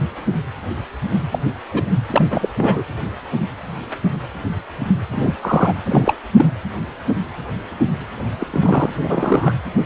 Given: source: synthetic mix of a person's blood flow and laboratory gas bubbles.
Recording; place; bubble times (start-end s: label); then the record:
Doppler ultrasound of blood flow; precordium
1.31-1.39 s: bubbles
1.70-1.92 s: bubbles
2.10-2.27 s: bubbles
2.30-2.49 s: bubbles
2.57-2.83 s: bubbles
5.12-5.33 s: bubbles
5.42-5.73 s: bubbles
5.85-6.14 s: bubbles
6.36-6.46 s: bubbles
8.40-8.46 s: bubbles
8.50-8.90 s: bubbles
9.01-9.52 s: bubbles
From the record:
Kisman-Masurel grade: 222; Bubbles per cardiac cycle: several, 3 to 8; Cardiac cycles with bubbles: 10 to 50%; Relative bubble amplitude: moderate (0.250 to 0.450); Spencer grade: 2 (many but less than half of the cardiac periods contain bubble signals, singularly or in groups); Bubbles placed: anywhere in the cardiac cycle